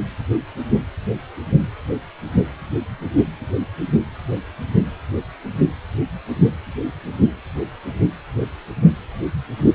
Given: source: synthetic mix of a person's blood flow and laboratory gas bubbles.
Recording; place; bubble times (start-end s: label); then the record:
Doppler ultrasound of blood flow; precordium
no bubbles
From the record:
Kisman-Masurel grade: 000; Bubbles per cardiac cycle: 0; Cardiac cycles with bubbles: 0%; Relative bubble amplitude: no bubbles discernible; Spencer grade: 0 (complete lack of bubble signals)